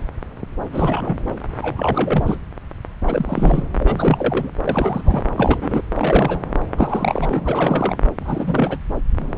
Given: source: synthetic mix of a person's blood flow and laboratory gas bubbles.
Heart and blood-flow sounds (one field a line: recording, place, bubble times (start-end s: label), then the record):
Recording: Doppler ultrasound of blood flow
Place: subclavian vein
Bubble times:
0.72-1.36 s: bubbles
1.61-2.38 s: bubbles
3.06-3.64 s: bubbles
3.78-4.52 s: bubbles
4.68-5.23 s: bubbles
5.37-5.82 s: bubbles
5.95-6.41 s: bubbles
6.77-7.96 s: bubbles
8.20-8.79 s: bubbles
9.36-9.38 s: bubbles
From the record:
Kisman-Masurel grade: 332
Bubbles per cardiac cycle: rolling drumbeat, 9 or more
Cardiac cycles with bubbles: 50 to 99%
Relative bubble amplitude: moderate (0.250 to 0.450)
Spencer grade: 3 (all of the cardiac periods contain showers or single bubble signals, but not dominating or overriding the cardiac motion signals)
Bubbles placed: anywhere in the cardiac cycle